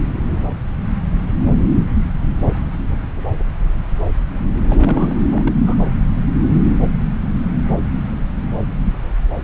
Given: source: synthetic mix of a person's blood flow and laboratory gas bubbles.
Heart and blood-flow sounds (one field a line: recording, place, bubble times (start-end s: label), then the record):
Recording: Doppler ultrasound of blood flow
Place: subclavian vein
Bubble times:
4.67-5.18 s: bubbles
5.31-5.53 s: bubbles
5.63-5.75 s: bubbles
From the record:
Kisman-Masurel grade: 211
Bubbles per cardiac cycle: several, 3 to 8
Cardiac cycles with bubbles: 1 to 10%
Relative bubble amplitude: barely perceptible (0.100 to 0.250)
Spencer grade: 1 (occasional bubble signal discernible with the cardiac motion signal, with majority of cardiac periods free of bubbles)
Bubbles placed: anywhere in the cardiac cycle